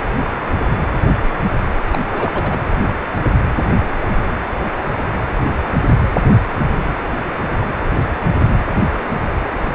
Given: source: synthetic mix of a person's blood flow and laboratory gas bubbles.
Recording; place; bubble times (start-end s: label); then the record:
Doppler ultrasound of blood flow; precordium
1.92-2.04 s: bubbles
2.11-2.32 s: bubbles
2.34-2.58 s: bubbles
From the record:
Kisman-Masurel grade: 212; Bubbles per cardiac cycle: several, 3 to 8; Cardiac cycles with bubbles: 1 to 10%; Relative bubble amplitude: moderate (0.250 to 0.450); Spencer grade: 1 (occasional bubble signal discernible with the cardiac motion signal, with majority of cardiac periods free of bubbles); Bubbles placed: anywhere in the cardiac cycle